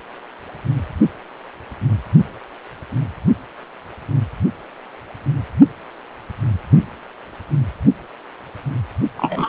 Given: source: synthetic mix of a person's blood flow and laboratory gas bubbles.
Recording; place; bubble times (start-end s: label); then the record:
Doppler ultrasound of blood flow; precordium
9.17-9.48 s: bubbles
From the record:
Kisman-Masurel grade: 113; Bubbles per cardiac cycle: 1 to 2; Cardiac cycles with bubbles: 1 to 10%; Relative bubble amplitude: loud (0.450 to 0.775); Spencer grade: 1 (occasional bubble signal discernible with the cardiac motion signal, with majority of cardiac periods free of bubbles); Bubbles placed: only in the low amplitude regions of the cardiac cycle